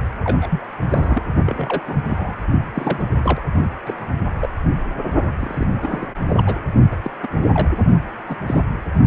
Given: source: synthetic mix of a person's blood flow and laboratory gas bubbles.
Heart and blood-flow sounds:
Doppler ultrasound of blood flow; precordium
0.23-0.60 s: bubbles
0.86-1.23 s: bubbles
1.46-1.81 s: bubbles
1.85-1.96 s: bubbles
2.06-2.35 s: bubbles
2.74-3.09 s: bubbles
3.24-3.42 s: bubbles
3.85-4.05 s: bubbles
4.42-4.48 s: bubbles
5.39-5.67 s: bubbles
5.81-6.07 s: bubbles
6.26-6.60 s: bubbles
6.91-6.95 s: bubbles
7.02-7.10 s: bubbles
7.22-7.28 s: bubbles
7.53-7.68 s: bubbles
8.29-8.37 s: bubbles
8.47-8.65 s: bubbles
From the record:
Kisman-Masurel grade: 242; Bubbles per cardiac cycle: several, 3 to 8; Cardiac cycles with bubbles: 100%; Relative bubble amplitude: moderate (0.250 to 0.450); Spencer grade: 3 (all of the cardiac periods contain showers or single bubble signals, but not dominating or overriding the cardiac motion signals); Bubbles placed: only in the low amplitude regions of the cardiac cycle

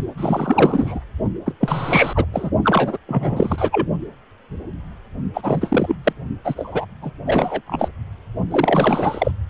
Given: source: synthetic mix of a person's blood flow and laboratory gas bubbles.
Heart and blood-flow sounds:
Doppler ultrasound of blood flow; precordium
0.17-1.00 s: bubbles
1.45-1.54 s: bubbles
1.60-2.25 s: bubbles
2.33-2.50 s: bubbles
2.64-2.97 s: bubbles
3.07-3.87 s: bubbles
5.33-5.96 s: bubbles
6.04-6.13 s: bubbles
6.44-6.85 s: bubbles
7.01-7.11 s: bubbles
7.25-7.62 s: bubbles
7.66-7.88 s: bubbles
8.51-9.31 s: bubbles
From the record:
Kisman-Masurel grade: 333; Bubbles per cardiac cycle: rolling drumbeat, 9 or more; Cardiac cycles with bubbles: 50 to 99%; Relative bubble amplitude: loud (0.450 to 0.775); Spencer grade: 3 (all of the cardiac periods contain showers or single bubble signals, but not dominating or overriding the cardiac motion signals); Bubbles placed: only in the low amplitude regions of the cardiac cycle

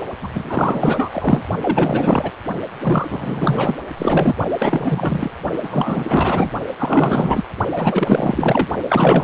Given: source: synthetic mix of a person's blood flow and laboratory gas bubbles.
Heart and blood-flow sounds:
Doppler ultrasound of blood flow; precordium
0.22-0.28 s: bubbles
0.35-1.09 s: bubbles
1.14-1.43 s: bubbles
1.61-2.31 s: bubbles
2.83-3.76 s: bubbles
3.97-4.36 s: bubbles
4.58-5.31 s: bubbles
5.62-6.52 s: bubbles
6.79-7.44 s: bubbles
7.75-8.68 s: bubbles
8.88-9.24 s: bubbles
From the record:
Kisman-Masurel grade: 444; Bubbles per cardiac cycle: continuous sound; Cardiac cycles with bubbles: 100%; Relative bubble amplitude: maximal (0.775 to 0.999); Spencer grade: 4 (maximum detectable bubble signal sounding continuously throughout systole and diastole of every cardiac period, and overriding the amplitude of the normal cardiac signals); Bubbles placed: only in the low amplitude regions of the cardiac cycle

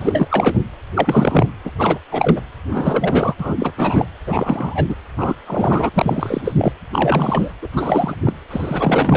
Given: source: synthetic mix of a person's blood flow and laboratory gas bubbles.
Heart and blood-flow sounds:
Doppler ultrasound of blood flow; precordium
0.00-0.27 s: bubbles
0.31-0.58 s: bubbles
0.94-1.47 s: bubbles
1.64-1.71 s: bubbles
1.78-1.99 s: bubbles
2.12-2.41 s: bubbles
2.69-3.34 s: bubbles
3.39-3.55 s: bubbles
3.59-3.74 s: bubbles
3.77-4.06 s: bubbles
4.26-4.96 s: bubbles
5.17-5.35 s: bubbles
5.46-5.89 s: bubbles
5.93-6.42 s: bubbles
6.44-6.55 s: bubbles
6.58-6.72 s: bubbles
6.92-7.53 s: bubbles
7.62-7.68 s: bubbles
7.72-8.14 s: bubbles
8.24-8.32 s: bubbles
8.50-9.17 s: bubbles
From the record:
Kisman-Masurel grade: 343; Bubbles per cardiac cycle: rolling drumbeat, 9 or more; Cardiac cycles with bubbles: 100%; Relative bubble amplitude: loud (0.450 to 0.775); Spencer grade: 3 (all of the cardiac periods contain showers or single bubble signals, but not dominating or overriding the cardiac motion signals); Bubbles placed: anywhere in the cardiac cycle

